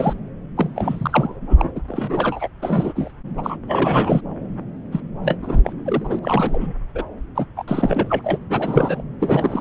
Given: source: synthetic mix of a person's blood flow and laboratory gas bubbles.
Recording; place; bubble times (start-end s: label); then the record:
Doppler ultrasound of blood flow; subclavian vein
0.00-0.13 s: bubbles
0.57-1.71 s: bubbles
1.75-1.80 s: bubbles
1.88-2.48 s: bubbles
2.62-3.11 s: bubbles
3.37-3.56 s: bubbles
3.68-4.21 s: bubbles
4.92-5.00 s: bubbles
5.24-5.38 s: bubbles
5.42-5.61 s: bubbles
5.64-5.73 s: bubbles
5.86-6.19 s: bubbles
6.22-6.73 s: bubbles
6.95-7.04 s: bubbles
7.35-7.45 s: bubbles
7.57-7.64 s: bubbles
7.68-8.21 s: bubbles
8.24-8.39 s: bubbles
8.50-9.02 s: bubbles
9.20-9.61 s: bubbles
From the record:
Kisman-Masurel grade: 342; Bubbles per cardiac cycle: rolling drumbeat, 9 or more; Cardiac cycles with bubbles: 100%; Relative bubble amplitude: moderate (0.250 to 0.450); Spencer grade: 3 (all of the cardiac periods contain showers or single bubble signals, but not dominating or overriding the cardiac motion signals); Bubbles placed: anywhere in the cardiac cycle